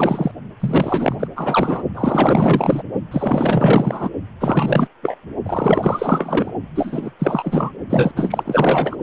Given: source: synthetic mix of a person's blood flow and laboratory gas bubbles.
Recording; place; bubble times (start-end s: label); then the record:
Doppler ultrasound of blood flow; precordium
0.00-0.32 s: bubbles
0.59-1.15 s: bubbles
1.19-1.27 s: bubbles
1.35-1.82 s: bubbles
1.95-2.83 s: bubbles
3.11-4.09 s: bubbles
4.40-4.88 s: bubbles
5.02-5.17 s: bubbles
5.46-6.51 s: bubbles
6.75-7.12 s: bubbles
7.18-7.71 s: bubbles
7.89-8.97 s: bubbles
From the record:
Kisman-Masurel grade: 444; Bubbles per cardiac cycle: continuous sound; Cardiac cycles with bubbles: 100%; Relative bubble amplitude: maximal (0.775 to 0.999); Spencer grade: 4 (maximum detectable bubble signal sounding continuously throughout systole and diastole of every cardiac period, and overriding the amplitude of the normal cardiac signals); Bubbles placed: only in the low amplitude regions of the cardiac cycle